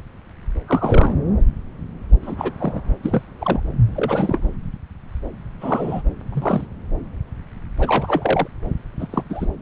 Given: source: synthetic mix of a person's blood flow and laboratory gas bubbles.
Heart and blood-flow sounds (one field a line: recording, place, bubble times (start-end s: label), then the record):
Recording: Doppler ultrasound of blood flow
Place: subclavian vein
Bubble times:
0.67-1.16 s: bubbles
2.22-2.35 s: bubbles
2.38-2.52 s: bubbles
2.59-2.81 s: bubbles
3.03-3.22 s: bubbles
3.38-3.59 s: bubbles
3.92-4.49 s: bubbles
5.60-6.02 s: bubbles
6.32-6.67 s: bubbles
7.78-8.47 s: bubbles
8.99-9.23 s: bubbles
9.29-9.46 s: bubbles
From the record:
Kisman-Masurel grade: 232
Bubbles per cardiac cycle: several, 3 to 8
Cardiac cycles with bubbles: 50 to 99%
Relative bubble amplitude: moderate (0.250 to 0.450)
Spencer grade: 3 (all of the cardiac periods contain showers or single bubble signals, but not dominating or overriding the cardiac motion signals)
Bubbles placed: anywhere in the cardiac cycle